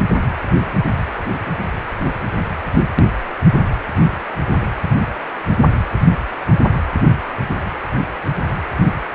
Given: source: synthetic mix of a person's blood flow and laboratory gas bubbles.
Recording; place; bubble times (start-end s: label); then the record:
Doppler ultrasound of blood flow; precordium
7.28-7.36 s: bubbles
From the record:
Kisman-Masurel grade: 121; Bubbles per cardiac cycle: 1 to 2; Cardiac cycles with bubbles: 10 to 50%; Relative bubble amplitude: barely perceptible (0.100 to 0.250); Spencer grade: 2 (many but less than half of the cardiac periods contain bubble signals, singularly or in groups); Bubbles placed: anywhere in the cardiac cycle